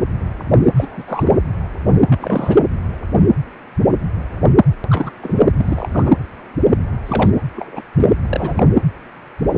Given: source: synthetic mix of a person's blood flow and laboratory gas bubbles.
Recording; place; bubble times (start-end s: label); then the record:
Doppler ultrasound of blood flow; precordium
0.76-1.03 s: bubbles
1.07-1.37 s: bubbles
2.07-2.57 s: bubbles
4.89-5.10 s: bubbles
5.21-5.42 s: bubbles
5.56-6.12 s: bubbles
7.06-7.30 s: bubbles
7.55-7.82 s: bubbles
7.96-8.13 s: bubbles
8.28-8.63 s: bubbles
From the record:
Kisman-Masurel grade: 222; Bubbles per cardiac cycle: several, 3 to 8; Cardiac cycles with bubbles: 10 to 50%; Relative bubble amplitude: moderate (0.250 to 0.450); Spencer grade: 2 (many but less than half of the cardiac periods contain bubble signals, singularly or in groups); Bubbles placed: anywhere in the cardiac cycle